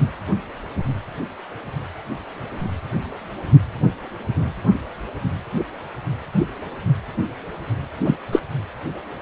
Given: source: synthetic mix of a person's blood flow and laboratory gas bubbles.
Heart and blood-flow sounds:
Doppler ultrasound of blood flow; precordium
8.04-8.17 s: bubbles
8.32-8.41 s: bubbles
From the record:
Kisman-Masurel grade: 113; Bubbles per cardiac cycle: 1 to 2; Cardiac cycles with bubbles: 1 to 10%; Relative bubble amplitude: loud (0.450 to 0.775); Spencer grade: 1 (occasional bubble signal discernible with the cardiac motion signal, with majority of cardiac periods free of bubbles); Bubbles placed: anywhere in the cardiac cycle

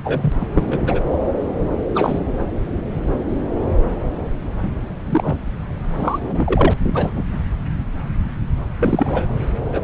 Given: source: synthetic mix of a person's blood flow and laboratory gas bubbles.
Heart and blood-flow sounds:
Doppler ultrasound of blood flow; subclavian vein
0.04-0.32 s: bubbles
0.40-0.47 s: bubbles
0.54-1.00 s: bubbles
1.95-2.19 s: bubbles
5.05-5.35 s: bubbles
5.83-6.19 s: bubbles
6.30-6.72 s: bubbles
6.84-7.25 s: bubbles
8.79-9.26 s: bubbles
9.73-9.81 s: bubbles
From the record:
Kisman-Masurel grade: 233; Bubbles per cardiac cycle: several, 3 to 8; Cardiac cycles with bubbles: 50 to 99%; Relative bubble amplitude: loud (0.450 to 0.775); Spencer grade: 3 (all of the cardiac periods contain showers or single bubble signals, but not dominating or overriding the cardiac motion signals); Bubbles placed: anywhere in the cardiac cycle

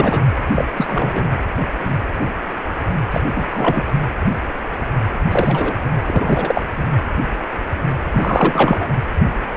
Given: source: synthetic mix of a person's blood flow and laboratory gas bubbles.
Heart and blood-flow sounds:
Doppler ultrasound of blood flow; precordium
0.00-0.23 s: bubbles
0.54-0.66 s: bubbles
0.76-1.28 s: bubbles
3.11-3.21 s: bubbles
3.34-3.93 s: bubbles
5.31-5.75 s: bubbles
6.06-6.63 s: bubbles
6.76-6.85 s: bubbles
8.12-8.87 s: bubbles
From the record:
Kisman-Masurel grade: 223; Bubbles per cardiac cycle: several, 3 to 8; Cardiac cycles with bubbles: 10 to 50%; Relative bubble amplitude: loud (0.450 to 0.775); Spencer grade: 2 (many but less than half of the cardiac periods contain bubble signals, singularly or in groups); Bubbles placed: anywhere in the cardiac cycle

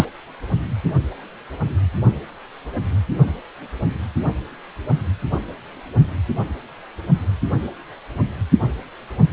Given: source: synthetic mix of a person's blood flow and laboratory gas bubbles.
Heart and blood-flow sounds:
Doppler ultrasound of blood flow; precordium
0.00-0.06 s: bubbles
From the record:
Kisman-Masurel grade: 113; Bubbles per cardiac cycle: 1 to 2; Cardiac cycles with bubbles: 1 to 10%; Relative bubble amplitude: loud (0.450 to 0.775); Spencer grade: 1 (occasional bubble signal discernible with the cardiac motion signal, with majority of cardiac periods free of bubbles); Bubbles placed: only in the low amplitude regions of the cardiac cycle

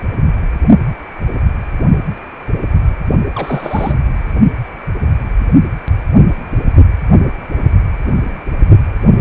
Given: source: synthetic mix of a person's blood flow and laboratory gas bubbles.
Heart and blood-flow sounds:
Doppler ultrasound of blood flow; precordium
3.35-3.98 s: bubbles
From the record:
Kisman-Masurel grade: 212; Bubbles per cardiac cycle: several, 3 to 8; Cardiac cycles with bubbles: 1 to 10%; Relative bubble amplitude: moderate (0.250 to 0.450); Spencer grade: 1 (occasional bubble signal discernible with the cardiac motion signal, with majority of cardiac periods free of bubbles); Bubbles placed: only in the low amplitude regions of the cardiac cycle

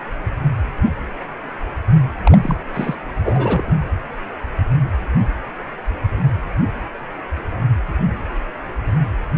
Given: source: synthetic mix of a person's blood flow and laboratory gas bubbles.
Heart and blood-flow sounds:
Doppler ultrasound of blood flow; precordium
2.23-2.38 s: bubbles
2.43-2.57 s: bubbles
2.73-2.95 s: bubbles
3.24-3.77 s: bubbles
From the record:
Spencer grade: 2 (many but less than half of the cardiac periods contain bubble signals, singularly or in groups); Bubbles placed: anywhere in the cardiac cycle

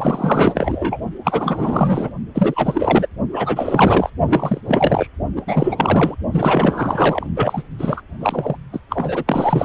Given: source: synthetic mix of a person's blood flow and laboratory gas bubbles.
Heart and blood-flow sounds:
Doppler ultrasound of blood flow; precordium
0.00-0.99 s: bubbles
1.24-2.11 s: bubbles
2.35-3.06 s: bubbles
3.31-4.10 s: bubbles
4.28-4.61 s: bubbles
4.65-5.07 s: bubbles
5.36-5.43 s: bubbles
5.46-6.15 s: bubbles
6.31-7.27 s: bubbles
7.36-7.62 s: bubbles
7.79-8.02 s: bubbles
8.21-8.57 s: bubbles
8.72-8.79 s: bubbles
8.89-9.65 s: bubbles
From the record:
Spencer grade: 4 (maximum detectable bubble signal sounding continuously throughout systole and diastole of every cardiac period, and overriding the amplitude of the normal cardiac signals); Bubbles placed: only in the low amplitude regions of the cardiac cycle

